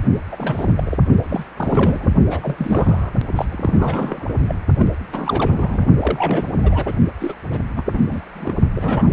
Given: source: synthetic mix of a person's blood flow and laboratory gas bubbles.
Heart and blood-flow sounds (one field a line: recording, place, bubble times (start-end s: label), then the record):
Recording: Doppler ultrasound of blood flow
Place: precordium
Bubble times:
0.32-0.74 s: bubbles
0.77-0.99 s: bubbles
1.29-1.44 s: bubbles
1.56-2.16 s: bubbles
2.30-3.11 s: bubbles
3.35-3.46 s: bubbles
3.51-4.34 s: bubbles
4.48-4.55 s: bubbles
4.78-4.87 s: bubbles
5.12-5.84 s: bubbles
6.00-6.49 s: bubbles
6.63-6.94 s: bubbles
7.20-7.33 s: bubbles
7.50-7.59 s: bubbles
7.76-7.82 s: bubbles
7.85-8.54 s: bubbles
8.75-9.13 s: bubbles
From the record:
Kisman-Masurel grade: 342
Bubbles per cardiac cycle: rolling drumbeat, 9 or more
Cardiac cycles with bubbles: 100%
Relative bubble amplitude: moderate (0.250 to 0.450)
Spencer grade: 3 (all of the cardiac periods contain showers or single bubble signals, but not dominating or overriding the cardiac motion signals)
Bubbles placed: only in the low amplitude regions of the cardiac cycle